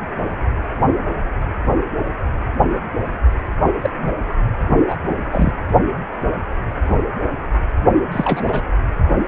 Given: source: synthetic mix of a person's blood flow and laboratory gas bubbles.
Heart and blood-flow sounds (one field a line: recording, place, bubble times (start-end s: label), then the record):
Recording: Doppler ultrasound of blood flow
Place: precordium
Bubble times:
3.81-3.90 s: bubbles
3.98-4.14 s: bubbles
4.87-4.96 s: bubbles
5.32-5.53 s: bubbles
8.12-8.62 s: bubbles
From the record:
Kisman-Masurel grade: 222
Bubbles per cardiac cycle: several, 3 to 8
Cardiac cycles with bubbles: 10 to 50%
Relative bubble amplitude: moderate (0.250 to 0.450)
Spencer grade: 2 (many but less than half of the cardiac periods contain bubble signals, singularly or in groups)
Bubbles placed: only in the low amplitude regions of the cardiac cycle